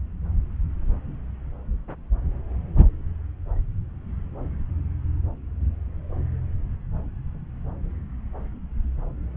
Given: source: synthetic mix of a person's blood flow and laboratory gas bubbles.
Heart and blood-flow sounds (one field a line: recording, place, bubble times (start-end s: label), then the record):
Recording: Doppler ultrasound of blood flow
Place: subclavian vein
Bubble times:
no bubbles
From the record:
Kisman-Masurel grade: 000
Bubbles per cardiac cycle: 0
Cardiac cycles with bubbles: 0%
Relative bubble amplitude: no bubbles discernible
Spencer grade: 0 (complete lack of bubble signals)